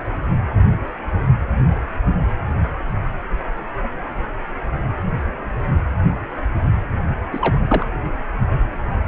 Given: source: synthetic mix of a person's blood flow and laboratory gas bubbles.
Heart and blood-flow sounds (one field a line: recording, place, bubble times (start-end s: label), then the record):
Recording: Doppler ultrasound of blood flow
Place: precordium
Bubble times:
7.32-7.61 s: bubbles
7.69-7.85 s: bubbles
From the record:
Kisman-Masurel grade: 222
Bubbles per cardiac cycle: several, 3 to 8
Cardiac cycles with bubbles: 10 to 50%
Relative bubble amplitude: moderate (0.250 to 0.450)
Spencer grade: 2 (many but less than half of the cardiac periods contain bubble signals, singularly or in groups)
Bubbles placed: anywhere in the cardiac cycle